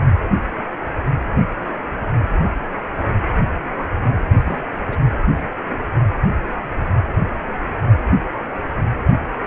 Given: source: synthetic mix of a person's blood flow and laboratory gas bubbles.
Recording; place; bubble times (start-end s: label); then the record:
Doppler ultrasound of blood flow; precordium
4.36-4.64 s: bubbles
4.68-4.86 s: bubbles
4.91-4.97 s: bubbles
From the record:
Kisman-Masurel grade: 211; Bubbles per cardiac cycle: several, 3 to 8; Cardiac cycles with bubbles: 1 to 10%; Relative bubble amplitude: barely perceptible (0.100 to 0.250); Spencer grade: 1 (occasional bubble signal discernible with the cardiac motion signal, with majority of cardiac periods free of bubbles); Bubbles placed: only in the low amplitude regions of the cardiac cycle